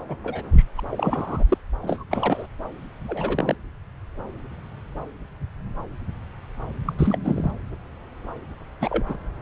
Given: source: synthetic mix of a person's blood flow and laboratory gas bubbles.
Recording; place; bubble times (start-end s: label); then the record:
Doppler ultrasound of blood flow; subclavian vein
0.09-0.16 s: bubbles
0.24-0.43 s: bubbles
0.52-0.65 s: bubbles
0.77-0.80 s: bubbles
0.91-1.44 s: bubbles
1.48-1.57 s: bubbles
1.82-2.04 s: bubbles
2.09-2.46 s: bubbles
3.08-3.55 s: bubbles
6.85-6.94 s: bubbles
6.99-7.18 s: bubbles
7.24-7.51 s: bubbles
8.81-9.05 s: bubbles
9.08-9.17 s: bubbles
From the record:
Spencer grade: 3 (all of the cardiac periods contain showers or single bubble signals, but not dominating or overriding the cardiac motion signals); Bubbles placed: anywhere in the cardiac cycle